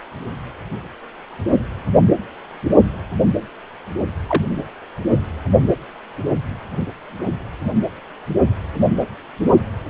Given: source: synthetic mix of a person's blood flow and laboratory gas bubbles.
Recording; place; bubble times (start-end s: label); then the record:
Doppler ultrasound of blood flow; precordium
4.29-4.43 s: bubbles
From the record:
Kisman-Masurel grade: 112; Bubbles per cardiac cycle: 1 to 2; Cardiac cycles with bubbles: 1 to 10%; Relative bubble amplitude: moderate (0.250 to 0.450); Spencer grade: 1 (occasional bubble signal discernible with the cardiac motion signal, with majority of cardiac periods free of bubbles); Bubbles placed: only in the low amplitude regions of the cardiac cycle